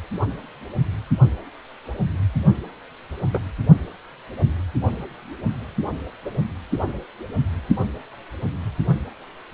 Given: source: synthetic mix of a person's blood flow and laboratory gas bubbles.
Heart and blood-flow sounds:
Doppler ultrasound of blood flow; precordium
3.33-3.40 s: bubbles
From the record:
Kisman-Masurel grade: 113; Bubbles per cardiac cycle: 1 to 2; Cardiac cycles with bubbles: 1 to 10%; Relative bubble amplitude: loud (0.450 to 0.775); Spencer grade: 1 (occasional bubble signal discernible with the cardiac motion signal, with majority of cardiac periods free of bubbles); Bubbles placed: only in the low amplitude regions of the cardiac cycle

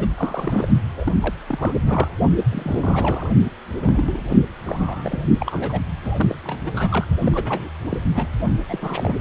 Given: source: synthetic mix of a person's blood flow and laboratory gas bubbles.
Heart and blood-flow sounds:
Doppler ultrasound of blood flow; precordium
0.00-0.07 s: bubbles
0.17-0.68 s: bubbles
0.97-1.13 s: bubbles
1.21-1.33 s: bubbles
1.47-1.73 s: bubbles
1.84-2.08 s: bubbles
2.37-2.44 s: bubbles
2.52-3.30 s: bubbles
3.82-4.21 s: bubbles
4.29-4.45 s: bubbles
4.66-5.22 s: bubbles
5.39-5.80 s: bubbles
6.04-6.37 s: bubbles
6.44-7.06 s: bubbles
7.21-7.70 s: bubbles
7.90-7.97 s: bubbles
8.13-8.26 s: bubbles
8.68-9.20 s: bubbles
From the record:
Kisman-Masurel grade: 342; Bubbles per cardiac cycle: rolling drumbeat, 9 or more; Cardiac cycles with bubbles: 100%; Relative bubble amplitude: moderate (0.250 to 0.450); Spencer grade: 3 (all of the cardiac periods contain showers or single bubble signals, but not dominating or overriding the cardiac motion signals); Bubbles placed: only in the low amplitude regions of the cardiac cycle

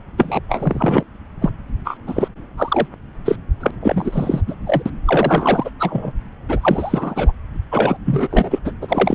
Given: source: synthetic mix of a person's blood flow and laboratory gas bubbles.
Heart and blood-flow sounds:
Doppler ultrasound of blood flow; subclavian vein
0.17-0.39 s: bubbles
0.48-1.03 s: bubbles
1.41-1.51 s: bubbles
1.85-1.98 s: bubbles
2.07-2.28 s: bubbles
2.57-2.87 s: bubbles
3.25-3.36 s: bubbles
3.60-3.71 s: bubbles
3.82-4.41 s: bubbles
4.47-4.54 s: bubbles
4.66-4.83 s: bubbles
4.86-4.91 s: bubbles
5.05-5.71 s: bubbles
5.79-6.12 s: bubbles
6.49-7.32 s: bubbles
7.72-7.97 s: bubbles
8.05-8.28 s: bubbles
8.30-8.59 s: bubbles
8.64-8.71 s: bubbles
8.81-9.15 s: bubbles
From the record:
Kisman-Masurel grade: 343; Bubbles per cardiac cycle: rolling drumbeat, 9 or more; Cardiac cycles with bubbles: 100%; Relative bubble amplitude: loud (0.450 to 0.775); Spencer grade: 3 (all of the cardiac periods contain showers or single bubble signals, but not dominating or overriding the cardiac motion signals); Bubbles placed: anywhere in the cardiac cycle

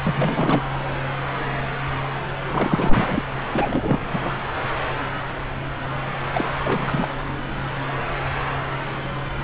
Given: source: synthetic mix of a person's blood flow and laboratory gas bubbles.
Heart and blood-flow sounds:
Doppler ultrasound of blood flow; subclavian vein
0.07-0.64 s: bubbles
2.47-3.22 s: bubbles
3.54-4.08 s: bubbles
4.12-4.38 s: bubbles
6.34-6.44 s: bubbles
6.64-7.09 s: bubbles
From the record:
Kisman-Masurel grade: 332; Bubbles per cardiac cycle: rolling drumbeat, 9 or more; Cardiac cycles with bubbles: 50 to 99%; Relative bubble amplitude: moderate (0.250 to 0.450); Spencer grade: 3 (all of the cardiac periods contain showers or single bubble signals, but not dominating or overriding the cardiac motion signals); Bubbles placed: anywhere in the cardiac cycle

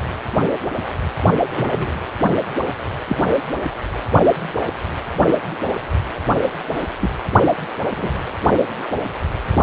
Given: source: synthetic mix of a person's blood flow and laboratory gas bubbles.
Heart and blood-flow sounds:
Doppler ultrasound of blood flow; precordium
1.50-1.94 s: bubbles
3.08-3.17 s: bubbles
7.01-7.10 s: bubbles
7.96-8.11 s: bubbles
From the record:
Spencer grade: 2 (many but less than half of the cardiac periods contain bubble signals, singularly or in groups); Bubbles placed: only in the low amplitude regions of the cardiac cycle

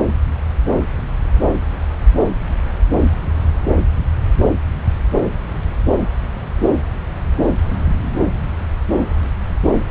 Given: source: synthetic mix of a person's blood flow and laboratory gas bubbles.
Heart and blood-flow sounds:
Doppler ultrasound of blood flow; subclavian vein
no bubbles
From the record:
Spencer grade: 0 (complete lack of bubble signals)

